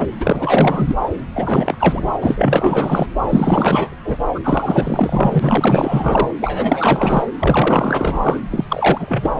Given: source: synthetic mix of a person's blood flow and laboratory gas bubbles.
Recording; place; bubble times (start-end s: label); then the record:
Doppler ultrasound of blood flow; subclavian vein
0.00-0.05 s: bubbles
0.20-0.96 s: bubbles
1.34-2.11 s: bubbles
2.21-3.06 s: bubbles
3.28-3.96 s: bubbles
4.04-4.17 s: bubbles
4.34-4.40 s: bubbles
4.43-6.30 s: bubbles
6.39-7.25 s: bubbles
7.39-8.40 s: bubbles
8.50-8.65 s: bubbles
8.68-9.31 s: bubbles
From the record:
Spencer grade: 4 (maximum detectable bubble signal sounding continuously throughout systole and diastole of every cardiac period, and overriding the amplitude of the normal cardiac signals); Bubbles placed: anywhere in the cardiac cycle